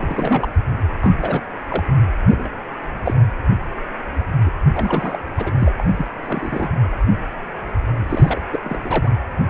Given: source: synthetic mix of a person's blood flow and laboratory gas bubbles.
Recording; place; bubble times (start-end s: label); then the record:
Doppler ultrasound of blood flow; precordium
0.00-0.46 s: bubbles
1.03-1.14 s: bubbles
1.21-1.40 s: bubbles
1.68-1.84 s: bubbles
2.29-2.50 s: bubbles
3.04-3.14 s: bubbles
4.45-4.50 s: bubbles
4.73-5.21 s: bubbles
5.38-5.52 s: bubbles
5.58-5.72 s: bubbles
5.77-6.08 s: bubbles
6.22-6.70 s: bubbles
8.09-8.40 s: bubbles
8.52-8.60 s: bubbles
8.63-9.11 s: bubbles
From the record:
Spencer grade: 3 (all of the cardiac periods contain showers or single bubble signals, but not dominating or overriding the cardiac motion signals); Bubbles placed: anywhere in the cardiac cycle